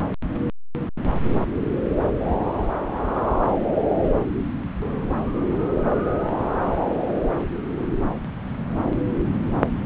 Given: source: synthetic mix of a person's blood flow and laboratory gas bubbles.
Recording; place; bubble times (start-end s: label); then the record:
Doppler ultrasound of blood flow; subclavian vein
no bubbles
From the record:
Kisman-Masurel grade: 000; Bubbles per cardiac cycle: 0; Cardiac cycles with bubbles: 0%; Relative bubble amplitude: no bubbles discernible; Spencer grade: 0 (complete lack of bubble signals)